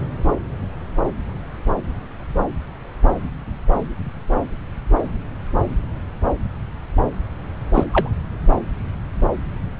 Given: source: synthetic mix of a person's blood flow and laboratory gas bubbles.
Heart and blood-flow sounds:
Doppler ultrasound of blood flow; subclavian vein
7.74-7.84 s: bubbles
7.92-8.10 s: bubbles
From the record:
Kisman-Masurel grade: 113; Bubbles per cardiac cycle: 1 to 2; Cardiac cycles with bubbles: 1 to 10%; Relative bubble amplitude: loud (0.450 to 0.775); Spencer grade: 1 (occasional bubble signal discernible with the cardiac motion signal, with majority of cardiac periods free of bubbles); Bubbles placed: anywhere in the cardiac cycle

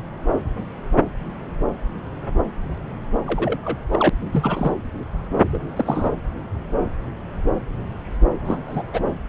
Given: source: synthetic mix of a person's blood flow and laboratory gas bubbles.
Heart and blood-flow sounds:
Doppler ultrasound of blood flow; subclavian vein
3.27-3.85 s: bubbles
3.92-4.09 s: bubbles
4.31-4.72 s: bubbles
5.52-5.62 s: bubbles
5.76-6.12 s: bubbles
8.45-8.58 s: bubbles
8.67-8.83 s: bubbles
8.92-9.00 s: bubbles
From the record:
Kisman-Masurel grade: 222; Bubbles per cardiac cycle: several, 3 to 8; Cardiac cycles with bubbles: 10 to 50%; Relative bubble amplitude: moderate (0.250 to 0.450); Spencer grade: 2 (many but less than half of the cardiac periods contain bubble signals, singularly or in groups); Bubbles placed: anywhere in the cardiac cycle

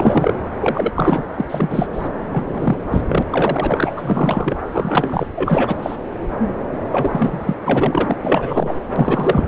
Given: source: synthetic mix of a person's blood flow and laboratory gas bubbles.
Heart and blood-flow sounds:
Doppler ultrasound of blood flow; subclavian vein
0.00-0.36 s: bubbles
0.60-0.93 s: bubbles
0.95-1.24 s: bubbles
1.37-1.45 s: bubbles
1.49-2.09 s: bubbles
2.31-2.78 s: bubbles
2.90-3.02 s: bubbles
3.08-3.23 s: bubbles
3.30-4.56 s: bubbles
4.66-5.27 s: bubbles
5.35-5.96 s: bubbles
6.92-7.54 s: bubbles
7.61-8.16 s: bubbles
8.23-8.74 s: bubbles
8.96-9.48 s: bubbles
From the record:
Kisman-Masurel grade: 332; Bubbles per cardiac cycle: rolling drumbeat, 9 or more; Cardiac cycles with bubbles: 50 to 99%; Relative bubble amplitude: moderate (0.250 to 0.450); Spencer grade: 3 (all of the cardiac periods contain showers or single bubble signals, but not dominating or overriding the cardiac motion signals); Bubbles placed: anywhere in the cardiac cycle

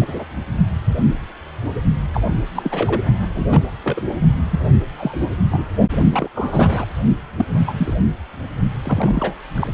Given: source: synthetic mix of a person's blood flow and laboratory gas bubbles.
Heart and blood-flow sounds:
Doppler ultrasound of blood flow; precordium
0.00-0.24 s: bubbles
2.13-2.21 s: bubbles
2.54-3.01 s: bubbles
3.35-3.62 s: bubbles
3.83-4.01 s: bubbles
4.50-4.59 s: bubbles
4.96-5.34 s: bubbles
5.50-5.67 s: bubbles
6.11-6.29 s: bubbles
6.34-6.85 s: bubbles
7.37-7.45 s: bubbles
7.66-7.93 s: bubbles
8.84-9.35 s: bubbles
9.54-9.68 s: bubbles
From the record:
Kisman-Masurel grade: 232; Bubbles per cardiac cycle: several, 3 to 8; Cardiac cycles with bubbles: 50 to 99%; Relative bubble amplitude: moderate (0.250 to 0.450); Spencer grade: 3 (all of the cardiac periods contain showers or single bubble signals, but not dominating or overriding the cardiac motion signals); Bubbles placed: only in the low amplitude regions of the cardiac cycle

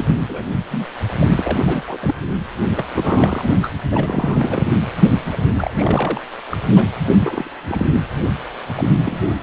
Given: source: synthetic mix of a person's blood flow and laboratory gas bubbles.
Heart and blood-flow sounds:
Doppler ultrasound of blood flow; precordium
0.00-0.14 s: bubbles
0.20-0.45 s: bubbles
0.70-0.86 s: bubbles
1.19-1.83 s: bubbles
1.87-1.98 s: bubbles
2.00-2.14 s: bubbles
2.71-2.85 s: bubbles
2.93-3.49 s: bubbles
3.62-3.70 s: bubbles
3.91-4.63 s: bubbles
5.30-5.37 s: bubbles
5.58-5.72 s: bubbles
5.75-6.21 s: bubbles
6.50-6.57 s: bubbles
6.75-6.82 s: bubbles
7.00-7.50 s: bubbles
7.67-7.87 s: bubbles
7.92-8.00 s: bubbles
8.75-8.90 s: bubbles
8.98-9.36 s: bubbles
From the record:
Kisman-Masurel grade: 342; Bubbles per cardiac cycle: rolling drumbeat, 9 or more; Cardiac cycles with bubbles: 100%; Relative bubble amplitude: moderate (0.250 to 0.450); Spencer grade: 3 (all of the cardiac periods contain showers or single bubble signals, but not dominating or overriding the cardiac motion signals); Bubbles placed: anywhere in the cardiac cycle

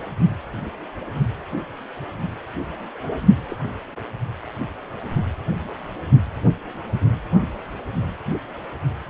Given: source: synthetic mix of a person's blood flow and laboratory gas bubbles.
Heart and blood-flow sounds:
Doppler ultrasound of blood flow; precordium
3.49-3.57 s: bubbles
From the record:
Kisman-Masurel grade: 111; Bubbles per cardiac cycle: 1 to 2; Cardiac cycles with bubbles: 1 to 10%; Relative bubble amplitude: barely perceptible (0.100 to 0.250); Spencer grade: 1 (occasional bubble signal discernible with the cardiac motion signal, with majority of cardiac periods free of bubbles); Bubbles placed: only in the low amplitude regions of the cardiac cycle

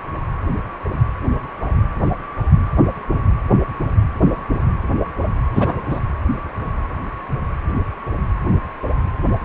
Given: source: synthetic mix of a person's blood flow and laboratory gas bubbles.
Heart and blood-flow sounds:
Doppler ultrasound of blood flow; precordium
5.55-5.82 s: bubbles
5.89-6.00 s: bubbles
From the record:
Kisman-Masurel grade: 213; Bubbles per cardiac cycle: several, 3 to 8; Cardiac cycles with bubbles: 1 to 10%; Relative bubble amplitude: loud (0.450 to 0.775); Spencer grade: 1 (occasional bubble signal discernible with the cardiac motion signal, with majority of cardiac periods free of bubbles); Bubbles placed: anywhere in the cardiac cycle

